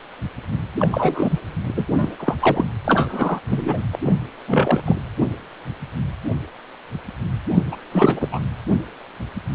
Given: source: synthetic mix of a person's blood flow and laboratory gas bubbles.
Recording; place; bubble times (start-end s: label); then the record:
Doppler ultrasound of blood flow; precordium
0.78-1.40 s: bubbles
1.68-1.85 s: bubbles
1.88-2.17 s: bubbles
2.20-2.35 s: bubbles
2.41-2.64 s: bubbles
2.84-3.40 s: bubbles
3.48-3.82 s: bubbles
3.93-3.99 s: bubbles
4.04-4.13 s: bubbles
4.48-4.83 s: bubbles
4.86-4.98 s: bubbles
7.54-7.62 s: bubbles
7.71-7.77 s: bubbles
7.92-8.28 s: bubbles
8.31-8.41 s: bubbles
From the record:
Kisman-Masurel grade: 333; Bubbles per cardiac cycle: rolling drumbeat, 9 or more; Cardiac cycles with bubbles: 50 to 99%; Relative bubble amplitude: loud (0.450 to 0.775); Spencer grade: 3 (all of the cardiac periods contain showers or single bubble signals, but not dominating or overriding the cardiac motion signals); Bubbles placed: anywhere in the cardiac cycle